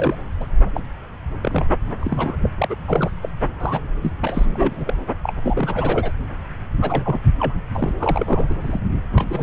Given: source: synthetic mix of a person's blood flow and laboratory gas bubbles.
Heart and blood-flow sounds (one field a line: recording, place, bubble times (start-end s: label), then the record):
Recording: Doppler ultrasound of blood flow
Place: subclavian vein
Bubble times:
0.00-0.15 s: bubbles
0.40-0.47 s: bubbles
0.75-0.81 s: bubbles
1.42-1.65 s: bubbles
2.00-2.37 s: bubbles
2.42-2.50 s: bubbles
2.58-2.75 s: bubbles
2.87-3.10 s: bubbles
3.22-3.29 s: bubbles
3.60-3.80 s: bubbles
4.03-4.11 s: bubbles
4.21-4.96 s: bubbles
5.23-5.33 s: bubbles
5.40-6.11 s: bubbles
6.81-7.19 s: bubbles
7.39-7.53 s: bubbles
7.74-7.92 s: bubbles
7.99-8.60 s: bubbles
8.63-8.79 s: bubbles
9.12-9.43 s: bubbles
From the record:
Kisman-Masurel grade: 342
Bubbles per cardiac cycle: rolling drumbeat, 9 or more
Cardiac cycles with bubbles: 100%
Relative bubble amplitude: moderate (0.250 to 0.450)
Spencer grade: 3 (all of the cardiac periods contain showers or single bubble signals, but not dominating or overriding the cardiac motion signals)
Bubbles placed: anywhere in the cardiac cycle